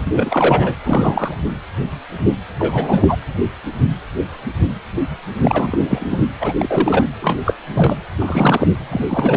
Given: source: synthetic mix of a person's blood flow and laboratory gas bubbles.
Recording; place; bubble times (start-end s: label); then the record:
Doppler ultrasound of blood flow; precordium
0.05-0.76 s: bubbles
0.84-1.34 s: bubbles
2.59-3.17 s: bubbles
5.42-6.05 s: bubbles
6.11-6.26 s: bubbles
6.40-6.54 s: bubbles
6.58-7.04 s: bubbles
7.21-7.38 s: bubbles
7.45-7.54 s: bubbles
7.74-7.97 s: bubbles
8.19-8.68 s: bubbles
8.90-9.06 s: bubbles
9.08-9.37 s: bubbles
From the record:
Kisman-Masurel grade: 233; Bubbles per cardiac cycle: several, 3 to 8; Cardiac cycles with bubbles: 50 to 99%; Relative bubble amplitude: loud (0.450 to 0.775); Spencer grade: 3 (all of the cardiac periods contain showers or single bubble signals, but not dominating or overriding the cardiac motion signals); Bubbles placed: anywhere in the cardiac cycle